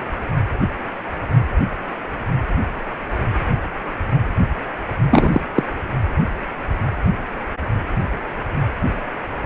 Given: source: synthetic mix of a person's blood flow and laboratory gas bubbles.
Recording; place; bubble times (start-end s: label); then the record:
Doppler ultrasound of blood flow; precordium
5.11-5.41 s: bubbles
5.55-5.63 s: bubbles
From the record:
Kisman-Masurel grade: 213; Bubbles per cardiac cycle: several, 3 to 8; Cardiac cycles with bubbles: 1 to 10%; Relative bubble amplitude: loud (0.450 to 0.775); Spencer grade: 1 (occasional bubble signal discernible with the cardiac motion signal, with majority of cardiac periods free of bubbles); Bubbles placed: anywhere in the cardiac cycle